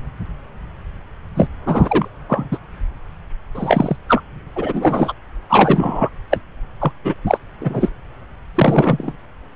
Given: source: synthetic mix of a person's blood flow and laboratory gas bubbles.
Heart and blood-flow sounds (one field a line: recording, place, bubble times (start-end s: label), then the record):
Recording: Doppler ultrasound of blood flow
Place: subclavian vein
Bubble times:
1.35-1.48 s: bubbles
1.66-2.08 s: bubbles
2.28-2.58 s: bubbles
3.55-3.96 s: bubbles
4.07-4.22 s: bubbles
4.56-5.14 s: bubbles
5.49-6.09 s: bubbles
6.31-6.40 s: bubbles
6.81-6.92 s: bubbles
7.04-7.15 s: bubbles
7.27-7.38 s: bubbles
7.61-7.89 s: bubbles
8.55-9.12 s: bubbles
From the record:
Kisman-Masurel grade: 233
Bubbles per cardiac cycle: several, 3 to 8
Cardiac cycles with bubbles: 50 to 99%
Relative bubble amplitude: loud (0.450 to 0.775)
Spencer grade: 3 (all of the cardiac periods contain showers or single bubble signals, but not dominating or overriding the cardiac motion signals)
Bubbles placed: anywhere in the cardiac cycle